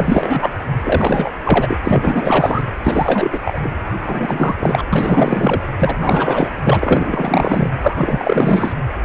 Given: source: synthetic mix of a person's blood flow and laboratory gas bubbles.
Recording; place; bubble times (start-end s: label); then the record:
Doppler ultrasound of blood flow; precordium
0.00-0.50 s: bubbles
0.84-1.31 s: bubbles
1.45-1.78 s: bubbles
1.84-2.62 s: bubbles
2.83-3.40 s: bubbles
3.44-3.61 s: bubbles
3.63-3.71 s: bubbles
4.01-4.55 s: bubbles
4.59-4.85 s: bubbles
4.92-5.62 s: bubbles
5.79-5.96 s: bubbles
5.99-6.54 s: bubbles
6.64-7.69 s: bubbles
7.82-8.73 s: bubbles
From the record:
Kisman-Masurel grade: 444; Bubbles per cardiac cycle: continuous sound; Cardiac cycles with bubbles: 100%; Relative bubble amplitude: maximal (0.775 to 0.999); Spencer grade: 4 (maximum detectable bubble signal sounding continuously throughout systole and diastole of every cardiac period, and overriding the amplitude of the normal cardiac signals); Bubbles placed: anywhere in the cardiac cycle